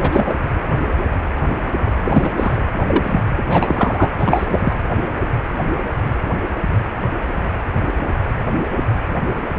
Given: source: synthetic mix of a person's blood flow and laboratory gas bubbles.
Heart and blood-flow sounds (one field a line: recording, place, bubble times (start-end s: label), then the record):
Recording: Doppler ultrasound of blood flow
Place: precordium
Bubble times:
0.00-0.36 s: bubbles
2.05-2.30 s: bubbles
2.37-2.58 s: bubbles
2.87-3.20 s: bubbles
3.33-4.11 s: bubbles
4.19-4.73 s: bubbles
From the record:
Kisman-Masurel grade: 223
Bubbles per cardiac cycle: several, 3 to 8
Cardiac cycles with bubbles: 10 to 50%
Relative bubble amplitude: loud (0.450 to 0.775)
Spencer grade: 2 (many but less than half of the cardiac periods contain bubble signals, singularly or in groups)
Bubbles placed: anywhere in the cardiac cycle